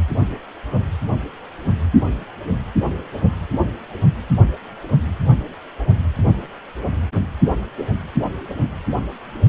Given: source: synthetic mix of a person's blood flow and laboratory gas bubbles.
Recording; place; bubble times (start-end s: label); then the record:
Doppler ultrasound of blood flow; precordium
no bubbles
From the record:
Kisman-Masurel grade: 000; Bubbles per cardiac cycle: 0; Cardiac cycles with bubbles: 0%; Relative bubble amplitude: no bubbles discernible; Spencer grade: 0 (complete lack of bubble signals)